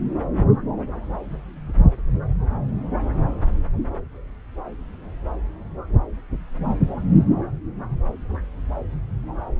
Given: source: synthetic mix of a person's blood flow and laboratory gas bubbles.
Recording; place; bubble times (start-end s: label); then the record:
Doppler ultrasound of blood flow; subclavian vein
no bubbles
From the record:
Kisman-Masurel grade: 000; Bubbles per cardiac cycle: 0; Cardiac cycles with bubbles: 0%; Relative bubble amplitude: no bubbles discernible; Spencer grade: 0 (complete lack of bubble signals)